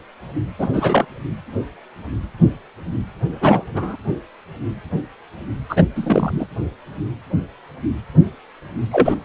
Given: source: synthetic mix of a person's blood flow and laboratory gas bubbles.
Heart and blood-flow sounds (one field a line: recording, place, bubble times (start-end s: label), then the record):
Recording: Doppler ultrasound of blood flow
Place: precordium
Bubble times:
0.58-0.68 s: bubbles
0.73-1.06 s: bubbles
3.41-3.64 s: bubbles
3.74-3.96 s: bubbles
5.69-5.83 s: bubbles
5.96-6.46 s: bubbles
8.91-9.14 s: bubbles
From the record:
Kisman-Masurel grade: 223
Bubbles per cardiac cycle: several, 3 to 8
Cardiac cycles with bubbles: 10 to 50%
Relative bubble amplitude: loud (0.450 to 0.775)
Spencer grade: 2 (many but less than half of the cardiac periods contain bubble signals, singularly or in groups)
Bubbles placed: anywhere in the cardiac cycle